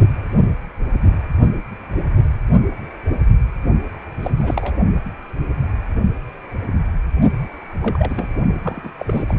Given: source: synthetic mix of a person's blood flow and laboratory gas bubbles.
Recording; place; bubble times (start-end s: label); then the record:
Doppler ultrasound of blood flow; precordium
4.23-4.31 s: bubbles
4.37-4.77 s: bubbles
7.82-8.28 s: bubbles
8.62-8.91 s: bubbles
9.00-9.38 s: bubbles
From the record:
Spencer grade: 2 (many but less than half of the cardiac periods contain bubble signals, singularly or in groups); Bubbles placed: only in the low amplitude regions of the cardiac cycle